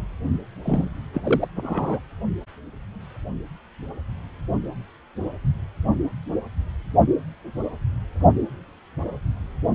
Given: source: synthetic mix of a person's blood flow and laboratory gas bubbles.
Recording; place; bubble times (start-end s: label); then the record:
Doppler ultrasound of blood flow; precordium
0.64-0.89 s: bubbles
1.13-1.48 s: bubbles
1.55-1.99 s: bubbles
From the record:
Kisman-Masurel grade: 212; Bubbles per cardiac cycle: several, 3 to 8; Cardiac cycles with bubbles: 1 to 10%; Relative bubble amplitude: moderate (0.250 to 0.450); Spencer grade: 1 (occasional bubble signal discernible with the cardiac motion signal, with majority of cardiac periods free of bubbles); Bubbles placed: only in the low amplitude regions of the cardiac cycle